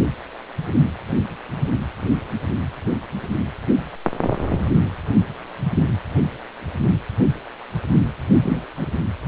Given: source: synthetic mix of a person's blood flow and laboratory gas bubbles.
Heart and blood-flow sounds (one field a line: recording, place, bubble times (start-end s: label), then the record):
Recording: Doppler ultrasound of blood flow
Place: precordium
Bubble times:
8.37-8.63 s: bubbles
8.77-8.88 s: bubbles
From the record:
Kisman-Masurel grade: 111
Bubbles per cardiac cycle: 1 to 2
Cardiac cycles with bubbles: 1 to 10%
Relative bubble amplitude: barely perceptible (0.100 to 0.250)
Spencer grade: 1 (occasional bubble signal discernible with the cardiac motion signal, with majority of cardiac periods free of bubbles)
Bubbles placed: anywhere in the cardiac cycle